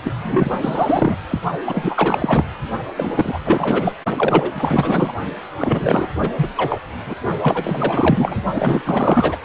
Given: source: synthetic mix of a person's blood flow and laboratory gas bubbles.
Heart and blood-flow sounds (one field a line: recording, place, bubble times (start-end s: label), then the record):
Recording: Doppler ultrasound of blood flow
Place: precordium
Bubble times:
0.03-0.15 s: bubbles
0.22-1.17 s: bubbles
1.29-1.40 s: bubbles
1.66-2.44 s: bubbles
2.97-3.40 s: bubbles
3.46-3.94 s: bubbles
4.17-5.13 s: bubbles
5.60-6.08 s: bubbles
6.20-6.29 s: bubbles
6.36-6.53 s: bubbles
6.56-6.81 s: bubbles
7.06-7.16 s: bubbles
7.42-8.39 s: bubbles
8.55-8.81 s: bubbles
8.85-9.39 s: bubbles
From the record:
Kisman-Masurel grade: 444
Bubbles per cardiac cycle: continuous sound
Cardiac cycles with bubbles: 100%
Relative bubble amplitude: maximal (0.775 to 0.999)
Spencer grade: 4 (maximum detectable bubble signal sounding continuously throughout systole and diastole of every cardiac period, and overriding the amplitude of the normal cardiac signals)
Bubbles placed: only in the low amplitude regions of the cardiac cycle